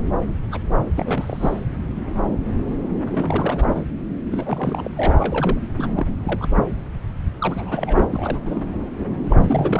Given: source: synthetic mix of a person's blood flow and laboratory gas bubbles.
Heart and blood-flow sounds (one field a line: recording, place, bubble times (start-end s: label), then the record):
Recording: Doppler ultrasound of blood flow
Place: subclavian vein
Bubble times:
0.51-0.60 s: bubbles
0.95-1.60 s: bubbles
3.11-3.85 s: bubbles
4.31-4.88 s: bubbles
4.96-5.58 s: bubbles
5.78-6.07 s: bubbles
6.23-6.47 s: bubbles
7.39-8.62 s: bubbles
9.26-9.80 s: bubbles
From the record:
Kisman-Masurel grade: 332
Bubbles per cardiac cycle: rolling drumbeat, 9 or more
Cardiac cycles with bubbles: 50 to 99%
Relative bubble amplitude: moderate (0.250 to 0.450)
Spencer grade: 3 (all of the cardiac periods contain showers or single bubble signals, but not dominating or overriding the cardiac motion signals)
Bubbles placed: anywhere in the cardiac cycle